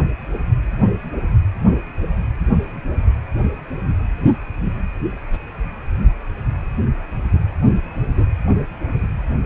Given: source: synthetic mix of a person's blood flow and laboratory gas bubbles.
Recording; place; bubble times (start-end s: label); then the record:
Doppler ultrasound of blood flow; precordium
no bubbles
From the record:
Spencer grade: 0 (complete lack of bubble signals)